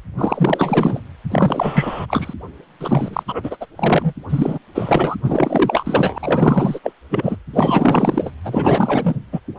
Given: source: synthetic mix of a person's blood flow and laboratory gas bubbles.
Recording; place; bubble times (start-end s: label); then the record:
Doppler ultrasound of blood flow; precordium
0.17-1.00 s: bubbles
1.30-2.06 s: bubbles
2.08-2.34 s: bubbles
2.81-3.23 s: bubbles
3.28-3.57 s: bubbles
3.60-3.66 s: bubbles
3.76-4.13 s: bubbles
4.29-4.58 s: bubbles
4.75-5.15 s: bubbles
5.24-6.79 s: bubbles
6.83-6.92 s: bubbles
7.10-7.37 s: bubbles
7.53-8.31 s: bubbles
8.44-9.16 s: bubbles
9.32-9.40 s: bubbles
From the record:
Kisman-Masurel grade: 444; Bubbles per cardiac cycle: continuous sound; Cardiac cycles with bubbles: 100%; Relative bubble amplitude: maximal (0.775 to 0.999); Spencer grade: 4 (maximum detectable bubble signal sounding continuously throughout systole and diastole of every cardiac period, and overriding the amplitude of the normal cardiac signals); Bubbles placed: anywhere in the cardiac cycle